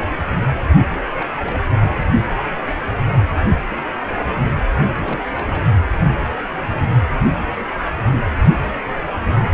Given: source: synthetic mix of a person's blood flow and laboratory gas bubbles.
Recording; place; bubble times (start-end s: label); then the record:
Doppler ultrasound of blood flow; precordium
1.17-1.25 s: bubbles
1.37-1.58 s: bubbles
1.72-1.94 s: bubbles
4.72-4.75 s: bubbles
4.87-5.22 s: bubbles
5.36-5.65 s: bubbles
From the record:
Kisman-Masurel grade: 221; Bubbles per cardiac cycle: several, 3 to 8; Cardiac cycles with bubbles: 10 to 50%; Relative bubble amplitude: barely perceptible (0.100 to 0.250); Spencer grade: 2 (many but less than half of the cardiac periods contain bubble signals, singularly or in groups); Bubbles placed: anywhere in the cardiac cycle